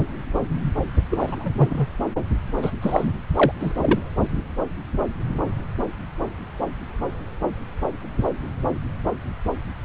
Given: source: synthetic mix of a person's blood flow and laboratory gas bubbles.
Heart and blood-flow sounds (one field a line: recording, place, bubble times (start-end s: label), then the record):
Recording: Doppler ultrasound of blood flow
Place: subclavian vein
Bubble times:
1.10-1.50 s: bubbles
1.57-1.87 s: bubbles
2.62-2.71 s: bubbles
2.81-3.11 s: bubbles
3.37-3.52 s: bubbles
3.60-3.73 s: bubbles
3.81-3.99 s: bubbles
From the record:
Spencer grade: 2 (many but less than half of the cardiac periods contain bubble signals, singularly or in groups)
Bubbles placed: anywhere in the cardiac cycle